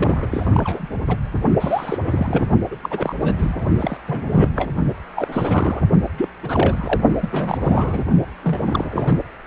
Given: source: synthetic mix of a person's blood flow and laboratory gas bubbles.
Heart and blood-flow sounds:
Doppler ultrasound of blood flow; precordium
0.00-0.27 s: bubbles
0.30-0.91 s: bubbles
1.07-1.16 s: bubbles
1.60-2.51 s: bubbles
2.71-2.77 s: bubbles
2.83-3.14 s: bubbles
3.21-3.35 s: bubbles
3.38-3.67 s: bubbles
3.79-3.98 s: bubbles
4.07-4.69 s: bubbles
5.15-5.82 s: bubbles
6.17-6.29 s: bubbles
6.42-7.00 s: bubbles
7.21-7.58 s: bubbles
7.60-8.03 s: bubbles
8.43-9.22 s: bubbles
From the record:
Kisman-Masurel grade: 342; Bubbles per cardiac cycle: rolling drumbeat, 9 or more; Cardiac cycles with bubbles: 100%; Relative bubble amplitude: moderate (0.250 to 0.450); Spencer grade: 3 (all of the cardiac periods contain showers or single bubble signals, but not dominating or overriding the cardiac motion signals); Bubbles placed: only in the low amplitude regions of the cardiac cycle

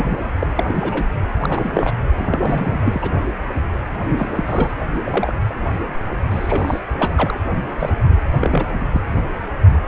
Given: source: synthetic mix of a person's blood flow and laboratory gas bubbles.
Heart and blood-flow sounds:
Doppler ultrasound of blood flow; precordium
0.00-0.18 s: bubbles
0.40-0.47 s: bubbles
0.56-1.04 s: bubbles
1.40-1.92 s: bubbles
2.17-3.10 s: bubbles
4.08-4.31 s: bubbles
4.34-4.71 s: bubbles
5.04-5.35 s: bubbles
5.49-5.53 s: bubbles
6.30-6.79 s: bubbles
6.97-7.41 s: bubbles
7.79-7.90 s: bubbles
8.40-8.85 s: bubbles
8.91-9.02 s: bubbles
From the record:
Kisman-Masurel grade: 232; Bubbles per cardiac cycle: several, 3 to 8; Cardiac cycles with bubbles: 50 to 99%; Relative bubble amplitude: moderate (0.250 to 0.450); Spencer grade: 3 (all of the cardiac periods contain showers or single bubble signals, but not dominating or overriding the cardiac motion signals); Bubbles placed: anywhere in the cardiac cycle

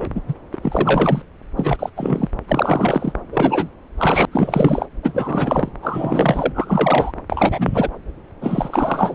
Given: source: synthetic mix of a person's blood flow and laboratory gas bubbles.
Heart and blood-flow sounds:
Doppler ultrasound of blood flow; subclavian vein
0.00-0.07 s: bubbles
0.15-0.21 s: bubbles
0.28-0.34 s: bubbles
0.54-0.58 s: bubbles
0.62-1.22 s: bubbles
1.57-1.90 s: bubbles
1.96-2.29 s: bubbles
2.48-3.12 s: bubbles
3.32-3.69 s: bubbles
3.98-4.26 s: bubbles
4.31-4.86 s: bubbles
5.03-5.71 s: bubbles
5.82-7.12 s: bubbles
7.29-7.89 s: bubbles
8.41-9.14 s: bubbles
From the record:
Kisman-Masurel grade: 343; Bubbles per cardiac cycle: rolling drumbeat, 9 or more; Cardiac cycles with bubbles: 100%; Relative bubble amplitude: loud (0.450 to 0.775); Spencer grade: 3 (all of the cardiac periods contain showers or single bubble signals, but not dominating or overriding the cardiac motion signals); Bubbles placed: anywhere in the cardiac cycle

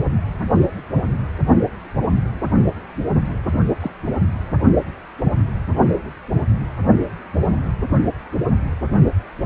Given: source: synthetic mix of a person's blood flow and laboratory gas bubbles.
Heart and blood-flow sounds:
Doppler ultrasound of blood flow; precordium
3.81-3.91 s: bubbles
From the record:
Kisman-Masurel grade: 112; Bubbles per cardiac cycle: 1 to 2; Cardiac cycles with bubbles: 1 to 10%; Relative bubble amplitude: moderate (0.250 to 0.450); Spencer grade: 1 (occasional bubble signal discernible with the cardiac motion signal, with majority of cardiac periods free of bubbles); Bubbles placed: anywhere in the cardiac cycle

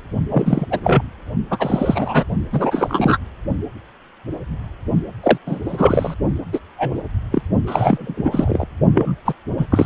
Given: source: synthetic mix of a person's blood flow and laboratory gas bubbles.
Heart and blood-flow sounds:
Doppler ultrasound of blood flow; precordium
0.31-0.67 s: bubbles
0.71-0.80 s: bubbles
0.84-1.02 s: bubbles
1.50-2.24 s: bubbles
2.52-3.17 s: bubbles
5.23-5.38 s: bubbles
5.46-5.60 s: bubbles
5.65-6.14 s: bubbles
6.53-6.60 s: bubbles
6.77-6.98 s: bubbles
7.31-7.42 s: bubbles
7.67-8.65 s: bubbles
8.94-9.16 s: bubbles
9.25-9.34 s: bubbles
9.58-9.66 s: bubbles
9.71-9.86 s: bubbles
From the record:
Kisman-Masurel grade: 233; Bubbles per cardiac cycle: several, 3 to 8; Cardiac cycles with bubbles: 50 to 99%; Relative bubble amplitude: loud (0.450 to 0.775); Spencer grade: 3 (all of the cardiac periods contain showers or single bubble signals, but not dominating or overriding the cardiac motion signals); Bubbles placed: only in the low amplitude regions of the cardiac cycle

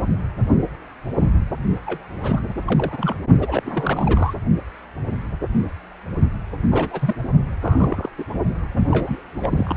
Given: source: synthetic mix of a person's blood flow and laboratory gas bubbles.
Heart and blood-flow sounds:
Doppler ultrasound of blood flow; precordium
1.84-2.07 s: bubbles
2.23-2.42 s: bubbles
2.65-3.15 s: bubbles
3.39-3.62 s: bubbles
3.65-4.34 s: bubbles
6.71-7.15 s: bubbles
7.62-8.09 s: bubbles
8.18-8.24 s: bubbles
8.77-8.88 s: bubbles
8.91-9.22 s: bubbles
9.29-9.76 s: bubbles
From the record:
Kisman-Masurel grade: 232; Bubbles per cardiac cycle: several, 3 to 8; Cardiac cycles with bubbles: 50 to 99%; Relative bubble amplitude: moderate (0.250 to 0.450); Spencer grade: 3 (all of the cardiac periods contain showers or single bubble signals, but not dominating or overriding the cardiac motion signals); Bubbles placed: only in the low amplitude regions of the cardiac cycle

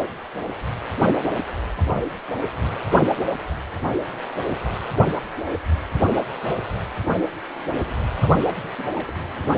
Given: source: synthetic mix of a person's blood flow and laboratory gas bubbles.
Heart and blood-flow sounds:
Doppler ultrasound of blood flow; precordium
1.75-2.00 s: bubbles
2.65-2.72 s: bubbles
8.19-8.40 s: bubbles
8.44-8.68 s: bubbles
8.78-8.88 s: bubbles
8.95-9.16 s: bubbles
From the record:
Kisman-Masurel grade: 221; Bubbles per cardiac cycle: several, 3 to 8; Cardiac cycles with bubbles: 10 to 50%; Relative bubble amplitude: barely perceptible (0.100 to 0.250); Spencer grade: 2 (many but less than half of the cardiac periods contain bubble signals, singularly or in groups); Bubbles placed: anywhere in the cardiac cycle

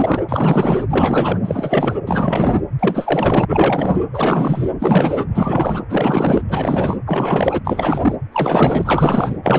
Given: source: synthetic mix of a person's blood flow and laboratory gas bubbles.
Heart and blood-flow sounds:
Doppler ultrasound of blood flow; precordium
0.00-0.22 s: bubbles
0.28-0.84 s: bubbles
0.89-1.96 s: bubbles
2.05-2.62 s: bubbles
2.79-3.45 s: bubbles
3.48-4.02 s: bubbles
4.12-4.71 s: bubbles
4.79-5.25 s: bubbles
5.34-5.83 s: bubbles
5.89-6.42 s: bubbles
6.48-6.97 s: bubbles
7.06-7.61 s: bubbles
7.64-8.16 s: bubbles
8.32-9.36 s: bubbles
9.43-9.59 s: bubbles
From the record:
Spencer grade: 4 (maximum detectable bubble signal sounding continuously throughout systole and diastole of every cardiac period, and overriding the amplitude of the normal cardiac signals); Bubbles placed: anywhere in the cardiac cycle

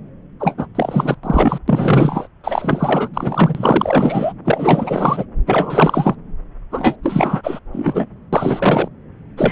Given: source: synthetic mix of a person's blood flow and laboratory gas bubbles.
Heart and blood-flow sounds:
Doppler ultrasound of blood flow; subclavian vein
0.40-0.55 s: bubbles
0.58-0.67 s: bubbles
0.75-1.15 s: bubbles
1.23-1.59 s: bubbles
1.68-2.27 s: bubbles
2.44-3.08 s: bubbles
3.14-4.33 s: bubbles
4.44-5.25 s: bubbles
5.46-6.15 s: bubbles
6.71-6.96 s: bubbles
7.02-7.59 s: bubbles
7.72-8.05 s: bubbles
8.33-8.88 s: bubbles
9.37-9.52 s: bubbles
From the record:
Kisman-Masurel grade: 444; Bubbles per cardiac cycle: continuous sound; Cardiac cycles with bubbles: 100%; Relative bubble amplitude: maximal (0.775 to 0.999); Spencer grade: 4 (maximum detectable bubble signal sounding continuously throughout systole and diastole of every cardiac period, and overriding the amplitude of the normal cardiac signals); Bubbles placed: anywhere in the cardiac cycle

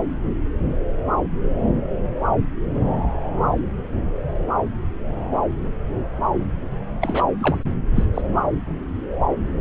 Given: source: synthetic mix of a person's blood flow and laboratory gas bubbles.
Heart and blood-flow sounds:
Doppler ultrasound of blood flow; subclavian vein
7.01-7.24 s: bubbles
7.39-7.58 s: bubbles
7.95-8.04 s: bubbles
8.14-8.22 s: bubbles
From the record:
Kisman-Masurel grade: 212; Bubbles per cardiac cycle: several, 3 to 8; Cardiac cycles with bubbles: 1 to 10%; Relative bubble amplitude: moderate (0.250 to 0.450); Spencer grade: 1 (occasional bubble signal discernible with the cardiac motion signal, with majority of cardiac periods free of bubbles); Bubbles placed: anywhere in the cardiac cycle

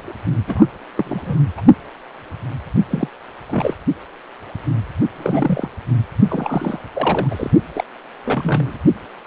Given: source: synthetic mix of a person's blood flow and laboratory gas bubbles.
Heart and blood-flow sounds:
Doppler ultrasound of blood flow; precordium
0.00-0.15 s: bubbles
0.47-0.66 s: bubbles
0.95-1.42 s: bubbles
1.57-1.62 s: bubbles
2.90-3.08 s: bubbles
3.50-3.74 s: bubbles
5.17-5.68 s: bubbles
6.29-6.79 s: bubbles
6.93-7.50 s: bubbles
7.74-7.84 s: bubbles
8.24-8.77 s: bubbles
From the record:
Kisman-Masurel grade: 232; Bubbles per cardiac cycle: several, 3 to 8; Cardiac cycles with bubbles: 50 to 99%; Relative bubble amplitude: moderate (0.250 to 0.450); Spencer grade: 3 (all of the cardiac periods contain showers or single bubble signals, but not dominating or overriding the cardiac motion signals); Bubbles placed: only in the low amplitude regions of the cardiac cycle

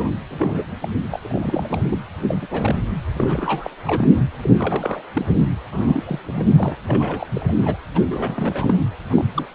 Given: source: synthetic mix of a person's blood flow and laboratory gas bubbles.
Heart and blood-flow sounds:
Doppler ultrasound of blood flow; precordium
0.00-0.15 s: bubbles
0.30-0.68 s: bubbles
0.81-0.89 s: bubbles
1.10-1.99 s: bubbles
2.22-2.37 s: bubbles
2.42-2.48 s: bubbles
2.50-2.78 s: bubbles
3.15-3.71 s: bubbles
3.85-4.08 s: bubbles
4.39-4.50 s: bubbles
4.57-5.02 s: bubbles
5.13-5.25 s: bubbles
5.72-6.03 s: bubbles
6.06-6.19 s: bubbles
6.25-6.78 s: bubbles
6.87-7.27 s: bubbles
7.33-7.53 s: bubbles
7.61-7.77 s: bubbles
7.95-8.01 s: bubbles
8.10-8.84 s: bubbles
9.10-9.48 s: bubbles
From the record:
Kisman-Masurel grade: 332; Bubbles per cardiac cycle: rolling drumbeat, 9 or more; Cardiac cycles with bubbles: 50 to 99%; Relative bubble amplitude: moderate (0.250 to 0.450); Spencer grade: 3 (all of the cardiac periods contain showers or single bubble signals, but not dominating or overriding the cardiac motion signals); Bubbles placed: anywhere in the cardiac cycle

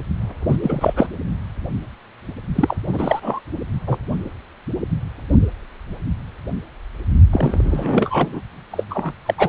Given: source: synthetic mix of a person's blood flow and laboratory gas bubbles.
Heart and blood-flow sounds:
Doppler ultrasound of blood flow; precordium
0.48-0.57 s: bubbles
0.62-1.06 s: bubbles
2.55-2.76 s: bubbles
2.87-3.40 s: bubbles
3.87-3.97 s: bubbles
7.32-8.41 s: bubbles
8.71-8.84 s: bubbles
8.90-9.12 s: bubbles
9.26-9.34 s: bubbles
9.38-9.49 s: bubbles
From the record:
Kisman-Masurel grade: 333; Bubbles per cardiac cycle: rolling drumbeat, 9 or more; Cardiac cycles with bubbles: 50 to 99%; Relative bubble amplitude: loud (0.450 to 0.775); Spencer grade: 3 (all of the cardiac periods contain showers or single bubble signals, but not dominating or overriding the cardiac motion signals); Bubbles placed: only in the low amplitude regions of the cardiac cycle

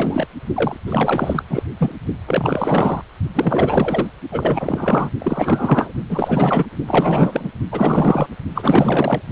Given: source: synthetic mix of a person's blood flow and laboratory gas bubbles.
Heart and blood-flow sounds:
Doppler ultrasound of blood flow; precordium
0.00-0.27 s: bubbles
0.55-0.77 s: bubbles
0.88-1.43 s: bubbles
1.47-1.62 s: bubbles
1.78-1.92 s: bubbles
2.27-3.01 s: bubbles
3.33-4.08 s: bubbles
4.31-5.09 s: bubbles
5.19-5.93 s: bubbles
6.08-6.67 s: bubbles
6.87-7.48 s: bubbles
7.71-8.36 s: bubbles
8.54-9.21 s: bubbles
From the record:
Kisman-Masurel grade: 444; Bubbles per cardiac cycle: continuous sound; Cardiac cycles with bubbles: 100%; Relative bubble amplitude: maximal (0.775 to 0.999); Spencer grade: 4 (maximum detectable bubble signal sounding continuously throughout systole and diastole of every cardiac period, and overriding the amplitude of the normal cardiac signals); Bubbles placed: only in the low amplitude regions of the cardiac cycle

